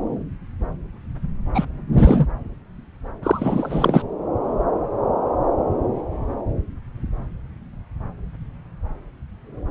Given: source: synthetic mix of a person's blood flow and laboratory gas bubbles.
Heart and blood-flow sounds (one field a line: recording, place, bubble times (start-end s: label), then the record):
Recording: Doppler ultrasound of blood flow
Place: subclavian vein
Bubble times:
1.54-1.65 s: bubbles
1.93-2.26 s: bubbles
3.23-4.02 s: bubbles
From the record:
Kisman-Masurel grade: 223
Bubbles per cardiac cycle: several, 3 to 8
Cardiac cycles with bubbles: 10 to 50%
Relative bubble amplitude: loud (0.450 to 0.775)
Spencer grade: 2 (many but less than half of the cardiac periods contain bubble signals, singularly or in groups)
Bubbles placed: anywhere in the cardiac cycle